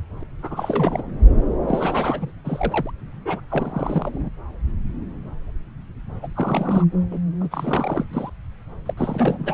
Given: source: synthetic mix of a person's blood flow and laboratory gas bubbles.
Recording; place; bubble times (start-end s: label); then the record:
Doppler ultrasound of blood flow; subclavian vein
0.20-0.24 s: bubbles
0.42-1.02 s: bubbles
1.68-2.31 s: bubbles
2.44-2.91 s: bubbles
3.25-3.40 s: bubbles
3.49-4.29 s: bubbles
6.22-6.27 s: bubbles
6.35-6.84 s: bubbles
7.11-7.18 s: bubbles
7.41-7.47 s: bubbles
7.51-8.05 s: bubbles
8.11-8.30 s: bubbles
8.86-8.94 s: bubbles
8.97-9.54 s: bubbles
From the record:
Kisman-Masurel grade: 332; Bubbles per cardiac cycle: rolling drumbeat, 9 or more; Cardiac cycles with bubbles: 50 to 99%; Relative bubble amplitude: moderate (0.250 to 0.450); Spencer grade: 3 (all of the cardiac periods contain showers or single bubble signals, but not dominating or overriding the cardiac motion signals); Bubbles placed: anywhere in the cardiac cycle